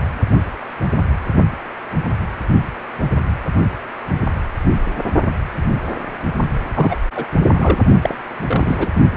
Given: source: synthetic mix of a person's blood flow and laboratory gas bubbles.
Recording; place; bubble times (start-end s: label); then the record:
Doppler ultrasound of blood flow; precordium
6.74-7.00 s: bubbles
7.15-7.28 s: bubbles
7.53-7.78 s: bubbles
8.01-8.15 s: bubbles
8.46-8.88 s: bubbles
From the record:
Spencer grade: 2 (many but less than half of the cardiac periods contain bubble signals, singularly or in groups); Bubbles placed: only in the low amplitude regions of the cardiac cycle